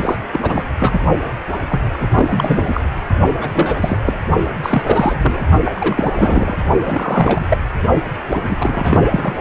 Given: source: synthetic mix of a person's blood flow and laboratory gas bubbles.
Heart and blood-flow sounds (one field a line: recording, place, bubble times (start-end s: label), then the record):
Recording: Doppler ultrasound of blood flow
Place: precordium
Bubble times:
0.01-0.17 s: bubbles
0.33-0.40 s: bubbles
0.42-0.64 s: bubbles
0.79-0.99 s: bubbles
1.70-1.81 s: bubbles
1.99-2.08 s: bubbles
2.10-2.80 s: bubbles
3.41-4.19 s: bubbles
4.62-5.42 s: bubbles
5.65-6.57 s: bubbles
6.85-7.46 s: bubbles
7.49-7.58 s: bubbles
8.30-9.01 s: bubbles
9.11-9.35 s: bubbles
From the record:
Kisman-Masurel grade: 342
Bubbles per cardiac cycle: rolling drumbeat, 9 or more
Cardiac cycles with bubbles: 100%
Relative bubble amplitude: moderate (0.250 to 0.450)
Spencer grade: 3 (all of the cardiac periods contain showers or single bubble signals, but not dominating or overriding the cardiac motion signals)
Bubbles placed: only in the low amplitude regions of the cardiac cycle